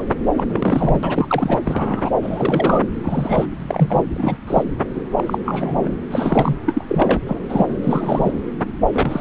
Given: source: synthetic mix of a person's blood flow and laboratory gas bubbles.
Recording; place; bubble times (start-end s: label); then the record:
Doppler ultrasound of blood flow; subclavian vein
0.00-0.05 s: bubbles
0.37-0.43 s: bubbles
0.48-1.57 s: bubbles
1.64-2.10 s: bubbles
2.22-2.85 s: bubbles
3.03-3.51 s: bubbles
3.60-4.05 s: bubbles
4.13-4.37 s: bubbles
4.46-4.63 s: bubbles
4.96-5.01 s: bubbles
5.17-5.38 s: bubbles
5.44-5.92 s: bubbles
6.10-6.57 s: bubbles
6.66-6.84 s: bubbles
6.88-7.19 s: bubbles
7.26-7.39 s: bubbles
7.48-7.67 s: bubbles
7.82-8.31 s: bubbles
8.92-9.21 s: bubbles
From the record:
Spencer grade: 3 (all of the cardiac periods contain showers or single bubble signals, but not dominating or overriding the cardiac motion signals); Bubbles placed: anywhere in the cardiac cycle